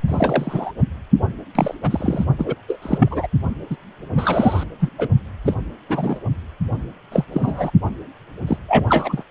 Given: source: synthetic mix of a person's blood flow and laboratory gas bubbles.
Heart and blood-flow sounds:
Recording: Doppler ultrasound of blood flow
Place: precordium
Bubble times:
0.08-0.72 s: bubbles
1.55-1.74 s: bubbles
1.82-2.24 s: bubbles
2.38-2.55 s: bubbles
2.67-2.77 s: bubbles
2.82-3.27 s: bubbles
3.70-3.76 s: bubbles
4.11-4.64 s: bubbles
4.79-4.90 s: bubbles
4.98-5.08 s: bubbles
5.45-5.54 s: bubbles
5.89-6.19 s: bubbles
7.12-7.25 s: bubbles
7.32-7.71 s: bubbles
8.47-8.57 s: bubbles
8.69-9.23 s: bubbles
From the record:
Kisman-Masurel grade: 243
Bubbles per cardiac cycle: several, 3 to 8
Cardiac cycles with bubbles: 100%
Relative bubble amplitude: loud (0.450 to 0.775)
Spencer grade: 3 (all of the cardiac periods contain showers or single bubble signals, but not dominating or overriding the cardiac motion signals)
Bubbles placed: only in the low amplitude regions of the cardiac cycle

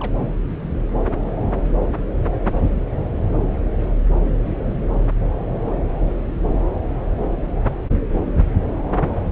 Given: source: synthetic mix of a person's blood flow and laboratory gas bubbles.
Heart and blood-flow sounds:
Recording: Doppler ultrasound of blood flow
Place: subclavian vein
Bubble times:
0.00-0.11 s: bubbles
From the record:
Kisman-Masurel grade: 111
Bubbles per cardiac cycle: 1 to 2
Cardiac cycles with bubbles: 1 to 10%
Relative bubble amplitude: barely perceptible (0.100 to 0.250)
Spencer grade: 1 (occasional bubble signal discernible with the cardiac motion signal, with majority of cardiac periods free of bubbles)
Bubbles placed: anywhere in the cardiac cycle

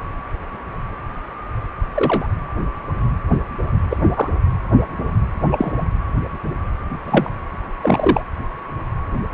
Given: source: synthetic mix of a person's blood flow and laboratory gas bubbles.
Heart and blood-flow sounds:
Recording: Doppler ultrasound of blood flow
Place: precordium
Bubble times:
1.95-2.29 s: bubbles
3.90-3.98 s: bubbles
4.16-4.29 s: bubbles
5.51-5.74 s: bubbles
7.04-7.29 s: bubbles
7.81-8.22 s: bubbles
From the record:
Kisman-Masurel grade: 123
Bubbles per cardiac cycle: 1 to 2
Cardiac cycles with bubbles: 10 to 50%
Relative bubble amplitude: loud (0.450 to 0.775)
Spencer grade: 2 (many but less than half of the cardiac periods contain bubble signals, singularly or in groups)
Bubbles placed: anywhere in the cardiac cycle

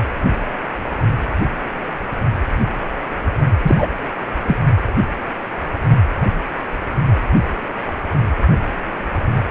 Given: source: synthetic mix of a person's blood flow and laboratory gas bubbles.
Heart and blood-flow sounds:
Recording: Doppler ultrasound of blood flow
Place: precordium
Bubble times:
3.63-3.87 s: bubbles
4.47-4.57 s: bubbles
From the record:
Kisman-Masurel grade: 213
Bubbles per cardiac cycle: several, 3 to 8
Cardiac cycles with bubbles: 1 to 10%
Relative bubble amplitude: loud (0.450 to 0.775)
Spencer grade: 1 (occasional bubble signal discernible with the cardiac motion signal, with majority of cardiac periods free of bubbles)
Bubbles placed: only in the low amplitude regions of the cardiac cycle

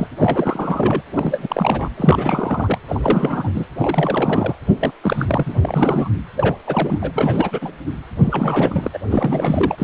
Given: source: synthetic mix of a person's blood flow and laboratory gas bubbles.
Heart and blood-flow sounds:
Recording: Doppler ultrasound of blood flow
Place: precordium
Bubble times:
0.00-0.07 s: bubbles
0.18-1.01 s: bubbles
1.14-1.91 s: bubbles
1.96-2.79 s: bubbles
2.88-3.51 s: bubbles
3.54-3.66 s: bubbles
3.79-4.55 s: bubbles
4.80-4.92 s: bubbles
5.01-5.43 s: bubbles
5.46-6.09 s: bubbles
6.37-6.55 s: bubbles
6.67-6.99 s: bubbles
7.01-7.11 s: bubbles
7.14-7.72 s: bubbles
8.17-8.99 s: bubbles
9.11-9.75 s: bubbles
9.78-9.84 s: bubbles
From the record:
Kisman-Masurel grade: 342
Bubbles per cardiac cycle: rolling drumbeat, 9 or more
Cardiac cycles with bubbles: 100%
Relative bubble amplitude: moderate (0.250 to 0.450)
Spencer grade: 3 (all of the cardiac periods contain showers or single bubble signals, but not dominating or overriding the cardiac motion signals)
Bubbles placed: anywhere in the cardiac cycle

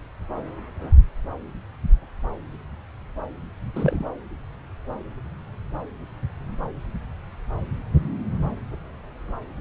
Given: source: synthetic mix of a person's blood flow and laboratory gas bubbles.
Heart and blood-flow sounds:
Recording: Doppler ultrasound of blood flow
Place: subclavian vein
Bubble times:
3.74-4.10 s: bubbles
From the record:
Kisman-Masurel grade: 112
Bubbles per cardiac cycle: 1 to 2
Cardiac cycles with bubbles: 1 to 10%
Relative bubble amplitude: moderate (0.250 to 0.450)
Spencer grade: 1 (occasional bubble signal discernible with the cardiac motion signal, with majority of cardiac periods free of bubbles)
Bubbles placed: anywhere in the cardiac cycle

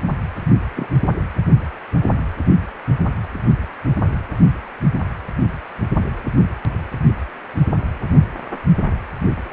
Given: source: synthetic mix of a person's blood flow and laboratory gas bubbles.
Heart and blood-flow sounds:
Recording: Doppler ultrasound of blood flow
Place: precordium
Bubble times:
0.75-0.88 s: bubbles
From the record:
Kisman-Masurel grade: 112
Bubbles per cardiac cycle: 1 to 2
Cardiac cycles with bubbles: 1 to 10%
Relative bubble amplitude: moderate (0.250 to 0.450)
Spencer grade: 1 (occasional bubble signal discernible with the cardiac motion signal, with majority of cardiac periods free of bubbles)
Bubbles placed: only in the low amplitude regions of the cardiac cycle

